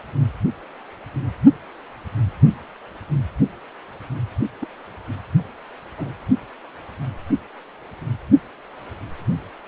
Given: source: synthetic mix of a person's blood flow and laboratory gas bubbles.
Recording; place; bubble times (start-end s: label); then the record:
Doppler ultrasound of blood flow; precordium
4.61-4.67 s: bubbles
5.97-6.13 s: bubbles
From the record:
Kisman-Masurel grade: 111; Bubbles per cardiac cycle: 1 to 2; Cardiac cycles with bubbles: 1 to 10%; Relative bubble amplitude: barely perceptible (0.100 to 0.250); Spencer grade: 1 (occasional bubble signal discernible with the cardiac motion signal, with majority of cardiac periods free of bubbles); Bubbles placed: only in the low amplitude regions of the cardiac cycle